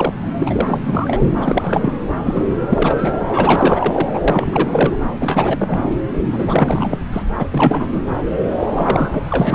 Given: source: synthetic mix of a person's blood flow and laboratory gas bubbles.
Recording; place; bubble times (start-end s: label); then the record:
Doppler ultrasound of blood flow; subclavian vein
0.00-0.13 s: bubbles
0.40-1.24 s: bubbles
1.38-1.97 s: bubbles
2.26-2.59 s: bubbles
2.62-3.13 s: bubbles
3.27-4.09 s: bubbles
4.14-4.21 s: bubbles
4.27-4.97 s: bubbles
5.19-5.80 s: bubbles
6.33-6.99 s: bubbles
7.12-7.22 s: bubbles
7.38-7.43 s: bubbles
7.52-7.89 s: bubbles
7.92-8.03 s: bubbles
8.59-8.67 s: bubbles
8.76-9.21 s: bubbles
9.31-9.55 s: bubbles
From the record:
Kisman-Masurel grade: 342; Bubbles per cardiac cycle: rolling drumbeat, 9 or more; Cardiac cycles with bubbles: 100%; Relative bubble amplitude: moderate (0.250 to 0.450); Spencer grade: 3 (all of the cardiac periods contain showers or single bubble signals, but not dominating or overriding the cardiac motion signals); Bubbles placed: anywhere in the cardiac cycle